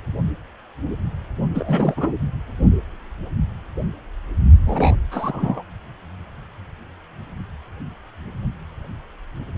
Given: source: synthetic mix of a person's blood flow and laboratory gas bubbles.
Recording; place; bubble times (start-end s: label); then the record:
Doppler ultrasound of blood flow; precordium
1.54-2.12 s: bubbles
4.66-4.97 s: bubbles
5.11-5.63 s: bubbles
From the record:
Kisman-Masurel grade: 222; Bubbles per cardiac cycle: several, 3 to 8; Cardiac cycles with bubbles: 10 to 50%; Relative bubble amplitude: moderate (0.250 to 0.450); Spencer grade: 2 (many but less than half of the cardiac periods contain bubble signals, singularly or in groups); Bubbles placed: only in the low amplitude regions of the cardiac cycle